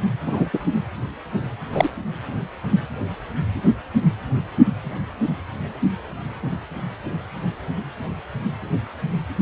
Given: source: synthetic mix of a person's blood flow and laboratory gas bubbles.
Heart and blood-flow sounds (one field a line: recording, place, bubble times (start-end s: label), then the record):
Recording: Doppler ultrasound of blood flow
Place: precordium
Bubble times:
0.26-0.51 s: bubbles
0.53-0.58 s: bubbles
1.72-1.88 s: bubbles
From the record:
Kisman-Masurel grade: 113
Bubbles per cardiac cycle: 1 to 2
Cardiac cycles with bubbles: 1 to 10%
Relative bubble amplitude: loud (0.450 to 0.775)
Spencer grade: 1 (occasional bubble signal discernible with the cardiac motion signal, with majority of cardiac periods free of bubbles)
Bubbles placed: anywhere in the cardiac cycle